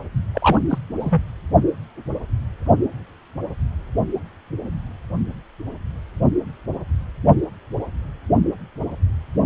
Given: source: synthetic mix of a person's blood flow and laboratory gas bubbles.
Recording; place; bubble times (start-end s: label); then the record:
Doppler ultrasound of blood flow; precordium
0.34-0.59 s: bubbles
0.69-0.78 s: bubbles
0.99-1.23 s: bubbles
From the record:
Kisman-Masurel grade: 212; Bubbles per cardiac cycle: several, 3 to 8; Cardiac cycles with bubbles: 1 to 10%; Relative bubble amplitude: moderate (0.250 to 0.450); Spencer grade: 1 (occasional bubble signal discernible with the cardiac motion signal, with majority of cardiac periods free of bubbles); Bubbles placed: only in the low amplitude regions of the cardiac cycle